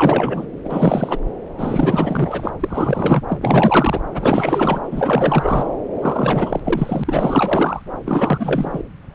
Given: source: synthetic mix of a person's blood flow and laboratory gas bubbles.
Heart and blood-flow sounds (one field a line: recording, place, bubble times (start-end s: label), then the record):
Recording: Doppler ultrasound of blood flow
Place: subclavian vein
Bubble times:
0.00-0.46 s: bubbles
0.64-1.20 s: bubbles
1.57-2.50 s: bubbles
2.60-3.23 s: bubbles
3.28-4.00 s: bubbles
4.13-4.81 s: bubbles
4.91-5.67 s: bubbles
6.01-6.60 s: bubbles
6.63-7.82 s: bubbles
8.04-8.82 s: bubbles
From the record:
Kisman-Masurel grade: 444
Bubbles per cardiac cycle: continuous sound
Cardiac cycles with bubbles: 100%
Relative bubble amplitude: maximal (0.775 to 0.999)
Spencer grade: 4 (maximum detectable bubble signal sounding continuously throughout systole and diastole of every cardiac period, and overriding the amplitude of the normal cardiac signals)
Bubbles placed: anywhere in the cardiac cycle